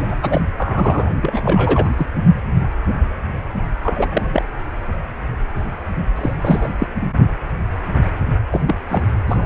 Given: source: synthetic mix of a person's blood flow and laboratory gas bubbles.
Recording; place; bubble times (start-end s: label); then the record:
Doppler ultrasound of blood flow; precordium
0.00-0.15 s: bubbles
0.22-0.41 s: bubbles
0.57-1.11 s: bubbles
1.22-1.89 s: bubbles
1.97-2.06 s: bubbles
3.83-4.45 s: bubbles
6.16-6.33 s: bubbles
6.42-6.73 s: bubbles
6.79-6.87 s: bubbles
7.00-7.06 s: bubbles
8.52-8.62 s: bubbles
8.65-8.77 s: bubbles
8.90-9.04 s: bubbles
9.27-9.46 s: bubbles
From the record:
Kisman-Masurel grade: 332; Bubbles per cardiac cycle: rolling drumbeat, 9 or more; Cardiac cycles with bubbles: 50 to 99%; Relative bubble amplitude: moderate (0.250 to 0.450); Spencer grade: 3 (all of the cardiac periods contain showers or single bubble signals, but not dominating or overriding the cardiac motion signals); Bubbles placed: only in the low amplitude regions of the cardiac cycle